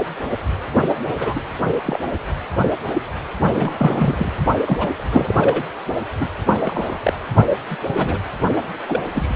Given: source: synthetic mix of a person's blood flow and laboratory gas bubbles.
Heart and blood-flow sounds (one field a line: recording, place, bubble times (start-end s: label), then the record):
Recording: Doppler ultrasound of blood flow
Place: precordium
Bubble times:
1.16-1.41 s: bubbles
1.85-1.99 s: bubbles
3.53-4.31 s: bubbles
4.66-4.90 s: bubbles
4.95-5.64 s: bubbles
6.20-6.28 s: bubbles
6.46-6.97 s: bubbles
7.03-7.13 s: bubbles
7.70-7.77 s: bubbles
7.89-8.18 s: bubbles
8.88-9.00 s: bubbles
9.12-9.35 s: bubbles
From the record:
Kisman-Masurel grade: 232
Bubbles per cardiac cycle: several, 3 to 8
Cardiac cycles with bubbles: 50 to 99%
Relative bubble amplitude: moderate (0.250 to 0.450)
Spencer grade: 3 (all of the cardiac periods contain showers or single bubble signals, but not dominating or overriding the cardiac motion signals)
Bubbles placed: only in the low amplitude regions of the cardiac cycle